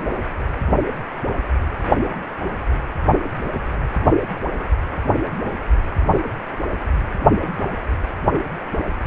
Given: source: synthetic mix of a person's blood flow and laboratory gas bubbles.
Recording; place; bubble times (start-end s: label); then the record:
Doppler ultrasound of blood flow; precordium
no bubbles
From the record:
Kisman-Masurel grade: 000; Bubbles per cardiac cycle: 0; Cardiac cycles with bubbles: 0%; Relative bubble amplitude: no bubbles discernible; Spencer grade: 0 (complete lack of bubble signals)